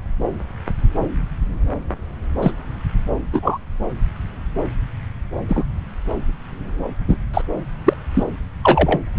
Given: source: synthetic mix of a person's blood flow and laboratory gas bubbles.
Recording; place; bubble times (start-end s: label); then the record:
Doppler ultrasound of blood flow; subclavian vein
2.41-2.52 s: bubbles
3.32-3.58 s: bubbles
5.48-5.64 s: bubbles
7.08-7.18 s: bubbles
7.33-7.42 s: bubbles
7.85-7.94 s: bubbles
8.14-8.23 s: bubbles
8.62-8.99 s: bubbles
From the record:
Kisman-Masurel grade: 123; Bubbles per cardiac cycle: 1 to 2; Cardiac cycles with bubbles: 10 to 50%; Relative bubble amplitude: loud (0.450 to 0.775); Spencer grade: 2 (many but less than half of the cardiac periods contain bubble signals, singularly or in groups); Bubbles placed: anywhere in the cardiac cycle